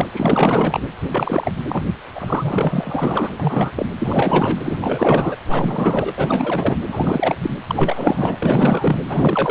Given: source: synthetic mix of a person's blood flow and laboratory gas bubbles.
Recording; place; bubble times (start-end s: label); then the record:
Doppler ultrasound of blood flow; precordium
0.00-0.07 s: bubbles
0.13-0.82 s: bubbles
1.09-1.53 s: bubbles
1.68-1.83 s: bubbles
2.15-3.33 s: bubbles
3.40-3.71 s: bubbles
3.75-3.86 s: bubbles
3.99-4.77 s: bubbles
4.81-5.35 s: bubbles
5.47-6.13 s: bubbles
6.17-6.77 s: bubbles
6.88-7.36 s: bubbles
7.42-7.50 s: bubbles
7.67-8.98 s: bubbles
9.08-9.51 s: bubbles
From the record:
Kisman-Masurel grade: 444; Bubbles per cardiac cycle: continuous sound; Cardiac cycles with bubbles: 100%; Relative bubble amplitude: maximal (0.775 to 0.999); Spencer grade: 4 (maximum detectable bubble signal sounding continuously throughout systole and diastole of every cardiac period, and overriding the amplitude of the normal cardiac signals); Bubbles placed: anywhere in the cardiac cycle